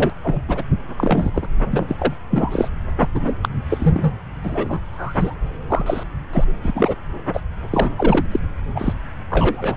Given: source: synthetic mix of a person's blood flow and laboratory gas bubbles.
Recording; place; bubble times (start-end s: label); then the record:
Doppler ultrasound of blood flow; subclavian vein
0.00-0.12 s: bubbles
0.23-0.41 s: bubbles
0.48-0.62 s: bubbles
0.97-1.31 s: bubbles
1.34-1.47 s: bubbles
1.70-2.14 s: bubbles
2.30-2.69 s: bubbles
2.99-3.08 s: bubbles
3.15-3.37 s: bubbles
3.42-3.48 s: bubbles
3.69-4.12 s: bubbles
4.44-4.79 s: bubbles
4.92-5.35 s: bubbles
5.69-6.04 s: bubbles
6.32-6.45 s: bubbles
6.64-6.72 s: bubbles
6.75-6.95 s: bubbles
7.33-7.41 s: bubbles
7.71-7.90 s: bubbles
7.96-8.27 s: bubbles
8.31-8.39 s: bubbles
8.75-8.94 s: bubbles
9.30-9.77 s: bubbles
From the record:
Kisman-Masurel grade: 243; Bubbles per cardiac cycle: several, 3 to 8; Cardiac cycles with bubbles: 100%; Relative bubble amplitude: loud (0.450 to 0.775); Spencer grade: 3 (all of the cardiac periods contain showers or single bubble signals, but not dominating or overriding the cardiac motion signals); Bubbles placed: anywhere in the cardiac cycle